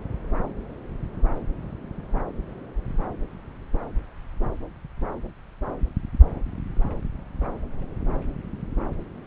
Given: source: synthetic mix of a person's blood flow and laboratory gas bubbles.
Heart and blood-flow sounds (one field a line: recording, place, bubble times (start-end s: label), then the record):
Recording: Doppler ultrasound of blood flow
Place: subclavian vein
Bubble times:
no bubbles
From the record:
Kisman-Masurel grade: 000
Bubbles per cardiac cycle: 0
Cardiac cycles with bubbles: 0%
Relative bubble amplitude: no bubbles discernible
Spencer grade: 0 (complete lack of bubble signals)